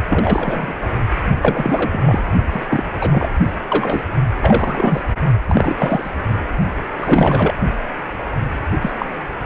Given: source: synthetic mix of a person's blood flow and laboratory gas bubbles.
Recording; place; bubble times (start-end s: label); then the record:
Doppler ultrasound of blood flow; precordium
0.09-0.73 s: bubbles
1.42-2.33 s: bubbles
2.50-2.67 s: bubbles
2.70-2.91 s: bubbles
3.00-3.29 s: bubbles
3.62-4.05 s: bubbles
4.41-5.01 s: bubbles
5.48-6.12 s: bubbles
6.98-7.54 s: bubbles
8.81-9.05 s: bubbles
From the record:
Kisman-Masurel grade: 333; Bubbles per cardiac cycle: rolling drumbeat, 9 or more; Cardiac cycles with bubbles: 50 to 99%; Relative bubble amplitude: loud (0.450 to 0.775); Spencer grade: 3 (all of the cardiac periods contain showers or single bubble signals, but not dominating or overriding the cardiac motion signals); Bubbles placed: only in the low amplitude regions of the cardiac cycle